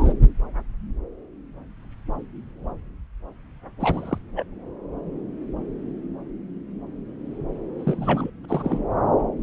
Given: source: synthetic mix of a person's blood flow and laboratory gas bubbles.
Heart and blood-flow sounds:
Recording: Doppler ultrasound of blood flow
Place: subclavian vein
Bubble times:
0.00-0.13 s: bubbles
3.80-4.18 s: bubbles
4.36-4.44 s: bubbles
7.78-8.30 s: bubbles
8.49-8.88 s: bubbles
From the record:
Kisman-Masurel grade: 222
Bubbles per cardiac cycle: several, 3 to 8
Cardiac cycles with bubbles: 10 to 50%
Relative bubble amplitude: moderate (0.250 to 0.450)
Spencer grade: 2 (many but less than half of the cardiac periods contain bubble signals, singularly or in groups)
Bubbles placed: anywhere in the cardiac cycle

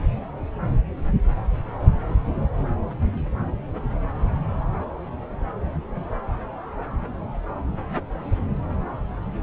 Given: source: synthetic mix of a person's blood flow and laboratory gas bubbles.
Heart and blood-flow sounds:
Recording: Doppler ultrasound of blood flow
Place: subclavian vein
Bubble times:
no bubbles
From the record:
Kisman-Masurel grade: 000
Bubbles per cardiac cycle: 0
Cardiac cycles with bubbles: 0%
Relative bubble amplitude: no bubbles discernible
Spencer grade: 0 (complete lack of bubble signals)

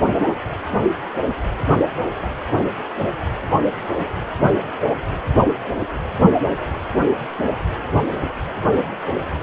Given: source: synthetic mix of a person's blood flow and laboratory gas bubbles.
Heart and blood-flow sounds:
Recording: Doppler ultrasound of blood flow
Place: precordium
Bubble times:
9.34-9.38 s: bubbles
From the record:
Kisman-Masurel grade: 111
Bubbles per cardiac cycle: 1 to 2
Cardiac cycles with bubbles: 1 to 10%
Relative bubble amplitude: barely perceptible (0.100 to 0.250)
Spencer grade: 1 (occasional bubble signal discernible with the cardiac motion signal, with majority of cardiac periods free of bubbles)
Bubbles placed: anywhere in the cardiac cycle

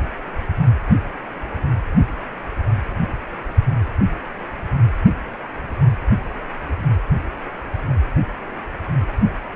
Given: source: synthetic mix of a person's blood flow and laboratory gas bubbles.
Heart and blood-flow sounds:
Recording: Doppler ultrasound of blood flow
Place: precordium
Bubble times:
no bubbles
From the record:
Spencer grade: 0 (complete lack of bubble signals)

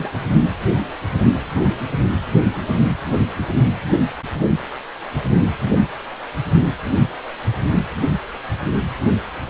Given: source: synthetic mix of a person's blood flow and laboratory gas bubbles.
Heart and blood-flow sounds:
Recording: Doppler ultrasound of blood flow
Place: precordium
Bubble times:
0.00-0.12 s: bubbles
From the record:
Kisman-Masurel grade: 112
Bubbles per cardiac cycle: 1 to 2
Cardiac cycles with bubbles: 1 to 10%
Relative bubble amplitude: moderate (0.250 to 0.450)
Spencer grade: 1 (occasional bubble signal discernible with the cardiac motion signal, with majority of cardiac periods free of bubbles)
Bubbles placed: anywhere in the cardiac cycle

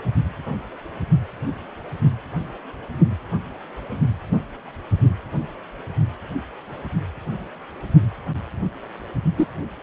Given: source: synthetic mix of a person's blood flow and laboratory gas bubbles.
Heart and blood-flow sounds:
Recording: Doppler ultrasound of blood flow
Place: precordium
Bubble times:
9.37-9.47 s: bubbles
From the record:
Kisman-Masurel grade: 112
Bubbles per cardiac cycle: 1 to 2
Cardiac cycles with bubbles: 1 to 10%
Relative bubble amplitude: moderate (0.250 to 0.450)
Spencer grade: 1 (occasional bubble signal discernible with the cardiac motion signal, with majority of cardiac periods free of bubbles)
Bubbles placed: anywhere in the cardiac cycle

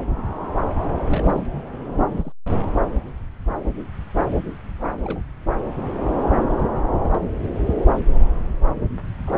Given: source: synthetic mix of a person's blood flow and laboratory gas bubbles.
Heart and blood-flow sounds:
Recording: Doppler ultrasound of blood flow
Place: subclavian vein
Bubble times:
1.08-1.45 s: bubbles
2.11-2.32 s: bubbles
5.02-5.21 s: bubbles
6.57-6.68 s: bubbles
6.98-7.20 s: bubbles
9.27-9.34 s: bubbles
From the record:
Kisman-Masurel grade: 121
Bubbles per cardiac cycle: 1 to 2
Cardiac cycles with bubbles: 10 to 50%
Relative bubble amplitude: barely perceptible (0.100 to 0.250)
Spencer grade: 2 (many but less than half of the cardiac periods contain bubble signals, singularly or in groups)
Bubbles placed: anywhere in the cardiac cycle

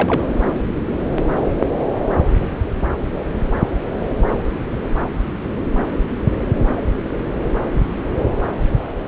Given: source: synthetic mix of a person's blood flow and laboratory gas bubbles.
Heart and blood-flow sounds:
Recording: Doppler ultrasound of blood flow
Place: subclavian vein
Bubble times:
0.00-0.30 s: bubbles
From the record:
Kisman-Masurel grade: 212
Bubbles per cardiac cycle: several, 3 to 8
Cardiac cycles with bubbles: 1 to 10%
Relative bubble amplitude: moderate (0.250 to 0.450)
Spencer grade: 1 (occasional bubble signal discernible with the cardiac motion signal, with majority of cardiac periods free of bubbles)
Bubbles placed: anywhere in the cardiac cycle

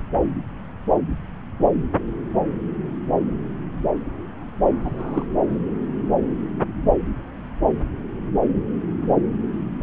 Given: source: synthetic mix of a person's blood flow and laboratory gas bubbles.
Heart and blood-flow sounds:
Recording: Doppler ultrasound of blood flow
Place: subclavian vein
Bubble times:
4.81-5.26 s: bubbles
From the record:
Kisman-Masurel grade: 211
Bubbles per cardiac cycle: several, 3 to 8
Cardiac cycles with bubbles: 1 to 10%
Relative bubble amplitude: barely perceptible (0.100 to 0.250)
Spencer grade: 1 (occasional bubble signal discernible with the cardiac motion signal, with majority of cardiac periods free of bubbles)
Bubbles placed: anywhere in the cardiac cycle

